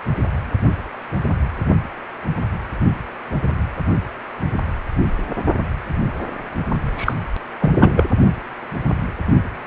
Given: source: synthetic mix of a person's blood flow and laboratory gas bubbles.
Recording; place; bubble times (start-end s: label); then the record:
Doppler ultrasound of blood flow; precordium
6.96-7.14 s: bubbles
7.59-7.70 s: bubbles
7.78-8.04 s: bubbles
From the record:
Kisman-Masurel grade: 213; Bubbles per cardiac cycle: several, 3 to 8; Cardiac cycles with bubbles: 1 to 10%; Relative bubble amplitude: loud (0.450 to 0.775); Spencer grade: 1 (occasional bubble signal discernible with the cardiac motion signal, with majority of cardiac periods free of bubbles); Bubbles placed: only in the low amplitude regions of the cardiac cycle